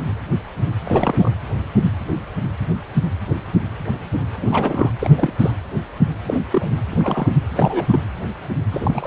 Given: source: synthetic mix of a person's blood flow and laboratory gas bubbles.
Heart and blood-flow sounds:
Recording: Doppler ultrasound of blood flow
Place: precordium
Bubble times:
0.84-1.32 s: bubbles
4.41-4.90 s: bubbles
4.99-5.33 s: bubbles
5.38-5.51 s: bubbles
6.27-6.39 s: bubbles
6.50-6.73 s: bubbles
6.90-7.33 s: bubbles
7.50-8.01 s: bubbles
8.71-9.07 s: bubbles
From the record:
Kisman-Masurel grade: 222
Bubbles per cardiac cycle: several, 3 to 8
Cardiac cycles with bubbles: 10 to 50%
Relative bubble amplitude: moderate (0.250 to 0.450)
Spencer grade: 2 (many but less than half of the cardiac periods contain bubble signals, singularly or in groups)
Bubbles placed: anywhere in the cardiac cycle

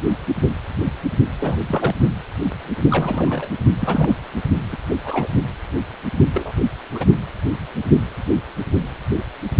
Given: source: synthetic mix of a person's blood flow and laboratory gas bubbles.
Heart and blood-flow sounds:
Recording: Doppler ultrasound of blood flow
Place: precordium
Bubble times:
1.40-1.57 s: bubbles
1.67-1.95 s: bubbles
2.91-3.49 s: bubbles
3.80-4.14 s: bubbles
4.72-4.77 s: bubbles
4.90-4.94 s: bubbles
5.04-5.28 s: bubbles
6.33-6.52 s: bubbles
6.95-7.05 s: bubbles
From the record:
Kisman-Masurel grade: 222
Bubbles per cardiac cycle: several, 3 to 8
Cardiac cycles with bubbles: 10 to 50%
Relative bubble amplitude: moderate (0.250 to 0.450)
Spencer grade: 2 (many but less than half of the cardiac periods contain bubble signals, singularly or in groups)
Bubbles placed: only in the low amplitude regions of the cardiac cycle

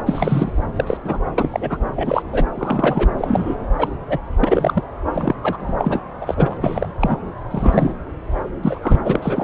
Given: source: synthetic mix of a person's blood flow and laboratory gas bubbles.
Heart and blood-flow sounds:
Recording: Doppler ultrasound of blood flow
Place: subclavian vein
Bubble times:
0.06-0.62 s: bubbles
0.75-0.97 s: bubbles
1.04-1.18 s: bubbles
1.38-1.78 s: bubbles
1.95-2.22 s: bubbles
2.33-2.46 s: bubbles
2.54-3.10 s: bubbles
3.18-3.55 s: bubbles
3.78-3.88 s: bubbles
4.08-4.18 s: bubbles
4.39-4.83 s: bubbles
5.13-5.34 s: bubbles
5.42-5.76 s: bubbles
5.79-6.00 s: bubbles
6.21-6.57 s: bubbles
6.61-6.88 s: bubbles
7.00-7.17 s: bubbles
7.50-7.92 s: bubbles
8.63-8.79 s: bubbles
8.82-9.01 s: bubbles
9.04-9.20 s: bubbles
9.22-9.43 s: bubbles
From the record:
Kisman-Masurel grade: 243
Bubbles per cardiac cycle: several, 3 to 8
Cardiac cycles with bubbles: 100%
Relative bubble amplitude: loud (0.450 to 0.775)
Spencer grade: 3 (all of the cardiac periods contain showers or single bubble signals, but not dominating or overriding the cardiac motion signals)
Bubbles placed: anywhere in the cardiac cycle

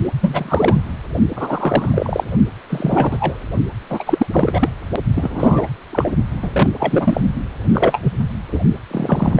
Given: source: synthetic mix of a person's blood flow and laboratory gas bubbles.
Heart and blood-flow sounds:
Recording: Doppler ultrasound of blood flow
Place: precordium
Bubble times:
0.21-0.81 s: bubbles
1.35-2.24 s: bubbles
2.69-3.40 s: bubbles
3.89-4.26 s: bubbles
4.31-4.71 s: bubbles
5.15-5.66 s: bubbles
5.93-6.09 s: bubbles
6.42-6.50 s: bubbles
6.54-6.69 s: bubbles
6.79-7.21 s: bubbles
7.73-7.99 s: bubbles
8.03-8.13 s: bubbles
8.52-8.60 s: bubbles
8.91-9.39 s: bubbles
From the record:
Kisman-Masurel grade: 243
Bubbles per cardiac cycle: several, 3 to 8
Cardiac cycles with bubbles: 100%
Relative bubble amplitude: loud (0.450 to 0.775)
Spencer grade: 3 (all of the cardiac periods contain showers or single bubble signals, but not dominating or overriding the cardiac motion signals)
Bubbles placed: only in the low amplitude regions of the cardiac cycle

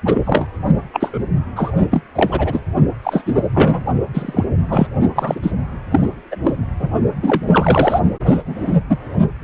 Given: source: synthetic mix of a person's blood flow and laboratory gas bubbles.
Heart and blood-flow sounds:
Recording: Doppler ultrasound of blood flow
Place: precordium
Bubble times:
0.05-0.47 s: bubbles
0.93-1.23 s: bubbles
1.55-1.72 s: bubbles
1.91-2.02 s: bubbles
2.15-2.60 s: bubbles
3.03-3.44 s: bubbles
3.54-3.84 s: bubbles
4.13-4.45 s: bubbles
4.68-4.87 s: bubbles
5.16-5.51 s: bubbles
5.91-6.00 s: bubbles
6.31-6.36 s: bubbles
6.43-6.56 s: bubbles
6.79-6.89 s: bubbles
7.22-8.00 s: bubbles
8.25-8.42 s: bubbles
8.46-8.76 s: bubbles
8.89-8.97 s: bubbles
From the record:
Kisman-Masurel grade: 243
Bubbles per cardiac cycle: several, 3 to 8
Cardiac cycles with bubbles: 100%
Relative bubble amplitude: loud (0.450 to 0.775)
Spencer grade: 3 (all of the cardiac periods contain showers or single bubble signals, but not dominating or overriding the cardiac motion signals)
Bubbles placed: only in the low amplitude regions of the cardiac cycle

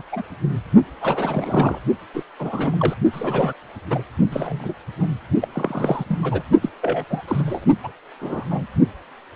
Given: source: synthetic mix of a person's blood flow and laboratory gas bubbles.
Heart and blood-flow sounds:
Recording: Doppler ultrasound of blood flow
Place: precordium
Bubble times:
0.00-0.02 s: bubbles
0.11-0.22 s: bubbles
1.01-1.79 s: bubbles
2.13-2.23 s: bubbles
2.38-2.95 s: bubbles
3.12-3.53 s: bubbles
3.90-4.02 s: bubbles
4.29-4.74 s: bubbles
5.00-5.08 s: bubbles
5.41-5.48 s: bubbles
5.53-6.04 s: bubbles
6.08-6.20 s: bubbles
6.22-6.43 s: bubbles
6.62-6.69 s: bubbles
6.82-7.04 s: bubbles
7.10-7.21 s: bubbles
7.28-7.66 s: bubbles
7.84-7.92 s: bubbles
8.21-8.44 s: bubbles
8.51-8.66 s: bubbles
From the record:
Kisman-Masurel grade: 232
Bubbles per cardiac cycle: several, 3 to 8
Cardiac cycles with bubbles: 50 to 99%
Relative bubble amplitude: moderate (0.250 to 0.450)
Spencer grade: 3 (all of the cardiac periods contain showers or single bubble signals, but not dominating or overriding the cardiac motion signals)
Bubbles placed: only in the low amplitude regions of the cardiac cycle

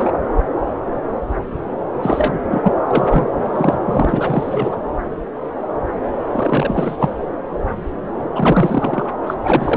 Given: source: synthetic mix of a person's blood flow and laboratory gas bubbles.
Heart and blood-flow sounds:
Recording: Doppler ultrasound of blood flow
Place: subclavian vein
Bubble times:
0.00-0.12 s: bubbles
2.02-2.41 s: bubbles
2.50-2.73 s: bubbles
2.88-3.48 s: bubbles
3.52-3.77 s: bubbles
3.85-4.76 s: bubbles
6.32-6.97 s: bubbles
7.00-7.15 s: bubbles
8.35-9.10 s: bubbles
9.27-9.34 s: bubbles
9.44-9.77 s: bubbles
From the record:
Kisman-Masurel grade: 333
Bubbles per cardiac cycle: rolling drumbeat, 9 or more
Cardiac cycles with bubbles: 50 to 99%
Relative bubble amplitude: loud (0.450 to 0.775)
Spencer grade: 3 (all of the cardiac periods contain showers or single bubble signals, but not dominating or overriding the cardiac motion signals)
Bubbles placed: anywhere in the cardiac cycle

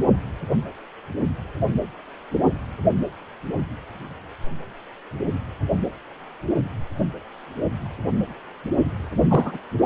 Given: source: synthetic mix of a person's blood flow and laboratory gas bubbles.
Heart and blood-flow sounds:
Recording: Doppler ultrasound of blood flow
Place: precordium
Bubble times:
9.28-9.58 s: bubbles
From the record:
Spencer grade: 2 (many but less than half of the cardiac periods contain bubble signals, singularly or in groups)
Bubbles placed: only in the low amplitude regions of the cardiac cycle

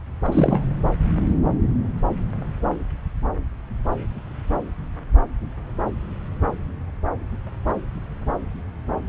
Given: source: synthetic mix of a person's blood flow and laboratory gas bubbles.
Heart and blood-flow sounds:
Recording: Doppler ultrasound of blood flow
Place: subclavian vein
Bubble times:
0.24-0.63 s: bubbles
From the record:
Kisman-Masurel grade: 212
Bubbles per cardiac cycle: several, 3 to 8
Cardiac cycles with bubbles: 1 to 10%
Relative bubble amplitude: moderate (0.250 to 0.450)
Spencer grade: 1 (occasional bubble signal discernible with the cardiac motion signal, with majority of cardiac periods free of bubbles)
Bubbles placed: anywhere in the cardiac cycle

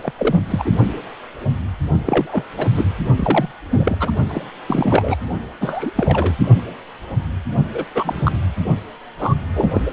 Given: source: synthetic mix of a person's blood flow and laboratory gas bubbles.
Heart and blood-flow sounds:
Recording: Doppler ultrasound of blood flow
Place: precordium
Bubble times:
0.00-0.12 s: bubbles
0.18-0.42 s: bubbles
0.47-0.72 s: bubbles
2.06-2.44 s: bubbles
2.57-2.68 s: bubbles
2.77-2.85 s: bubbles
3.17-3.52 s: bubbles
3.70-4.12 s: bubbles
4.29-4.45 s: bubbles
4.67-5.17 s: bubbles
5.61-5.91 s: bubbles
5.95-6.35 s: bubbles
7.74-7.84 s: bubbles
7.95-8.32 s: bubbles
9.18-9.34 s: bubbles
9.54-9.81 s: bubbles
9.85-9.91 s: bubbles
From the record:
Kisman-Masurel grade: 232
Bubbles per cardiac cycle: several, 3 to 8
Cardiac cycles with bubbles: 50 to 99%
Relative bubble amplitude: moderate (0.250 to 0.450)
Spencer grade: 3 (all of the cardiac periods contain showers or single bubble signals, but not dominating or overriding the cardiac motion signals)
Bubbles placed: only in the low amplitude regions of the cardiac cycle

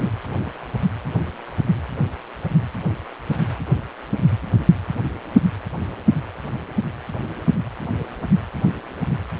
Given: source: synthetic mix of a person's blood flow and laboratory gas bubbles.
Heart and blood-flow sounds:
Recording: Doppler ultrasound of blood flow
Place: precordium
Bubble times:
0.00-0.10 s: bubbles
From the record:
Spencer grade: 1 (occasional bubble signal discernible with the cardiac motion signal, with majority of cardiac periods free of bubbles)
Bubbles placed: anywhere in the cardiac cycle

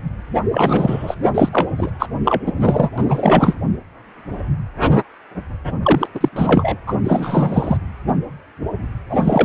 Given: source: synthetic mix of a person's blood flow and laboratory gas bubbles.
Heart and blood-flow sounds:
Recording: Doppler ultrasound of blood flow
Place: precordium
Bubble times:
0.51-1.15 s: bubbles
1.34-1.49 s: bubbles
1.52-1.68 s: bubbles
1.77-1.91 s: bubbles
1.99-2.08 s: bubbles
2.25-2.43 s: bubbles
2.46-2.52 s: bubbles
2.60-2.90 s: bubbles
2.98-3.04 s: bubbles
3.08-3.55 s: bubbles
5.83-6.07 s: bubbles
6.14-6.29 s: bubbles
6.32-6.77 s: bubbles
6.87-6.94 s: bubbles
7.04-7.77 s: bubbles
9.09-9.45 s: bubbles
From the record:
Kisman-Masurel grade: 333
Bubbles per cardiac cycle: rolling drumbeat, 9 or more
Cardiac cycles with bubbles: 50 to 99%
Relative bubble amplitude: loud (0.450 to 0.775)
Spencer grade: 3 (all of the cardiac periods contain showers or single bubble signals, but not dominating or overriding the cardiac motion signals)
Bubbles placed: anywhere in the cardiac cycle

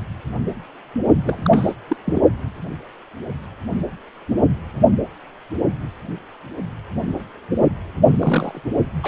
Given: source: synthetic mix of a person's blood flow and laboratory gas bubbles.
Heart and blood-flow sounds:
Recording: Doppler ultrasound of blood flow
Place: precordium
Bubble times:
1.17-1.74 s: bubbles
1.88-1.97 s: bubbles
2.05-2.20 s: bubbles
8.09-8.63 s: bubbles
9.03-9.08 s: bubbles
From the record:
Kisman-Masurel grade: 222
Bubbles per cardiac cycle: several, 3 to 8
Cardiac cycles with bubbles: 10 to 50%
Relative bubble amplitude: moderate (0.250 to 0.450)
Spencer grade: 2 (many but less than half of the cardiac periods contain bubble signals, singularly or in groups)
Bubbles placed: only in the low amplitude regions of the cardiac cycle

